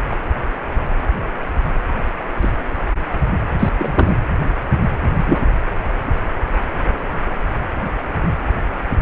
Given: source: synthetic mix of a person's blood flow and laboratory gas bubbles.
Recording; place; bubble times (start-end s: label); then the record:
Doppler ultrasound of blood flow; precordium
2.41-2.52 s: bubbles
3.59-3.69 s: bubbles
3.77-4.15 s: bubbles
5.13-5.41 s: bubbles
From the record:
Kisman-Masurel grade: 123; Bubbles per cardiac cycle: 1 to 2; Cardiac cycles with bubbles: 10 to 50%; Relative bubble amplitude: loud (0.450 to 0.775); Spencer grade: 2 (many but less than half of the cardiac periods contain bubble signals, singularly or in groups); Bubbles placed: anywhere in the cardiac cycle